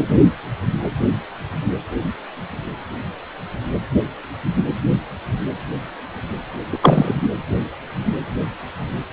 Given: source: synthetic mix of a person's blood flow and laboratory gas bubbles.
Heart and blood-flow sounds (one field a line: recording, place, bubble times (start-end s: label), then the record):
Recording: Doppler ultrasound of blood flow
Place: precordium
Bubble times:
6.71-6.79 s: bubbles
6.82-7.14 s: bubbles
From the record:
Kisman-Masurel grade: 213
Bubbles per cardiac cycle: several, 3 to 8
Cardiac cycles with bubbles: 1 to 10%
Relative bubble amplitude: loud (0.450 to 0.775)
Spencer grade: 1 (occasional bubble signal discernible with the cardiac motion signal, with majority of cardiac periods free of bubbles)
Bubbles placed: anywhere in the cardiac cycle